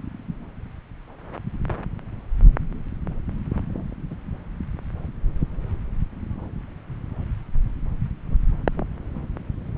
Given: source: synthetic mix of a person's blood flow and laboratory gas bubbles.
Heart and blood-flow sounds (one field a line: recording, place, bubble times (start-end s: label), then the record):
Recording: Doppler ultrasound of blood flow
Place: subclavian vein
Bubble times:
4.10-4.15 s: bubbles
From the record:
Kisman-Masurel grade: 111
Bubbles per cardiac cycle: 1 to 2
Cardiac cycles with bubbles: 1 to 10%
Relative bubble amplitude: barely perceptible (0.100 to 0.250)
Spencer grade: 1 (occasional bubble signal discernible with the cardiac motion signal, with majority of cardiac periods free of bubbles)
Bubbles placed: anywhere in the cardiac cycle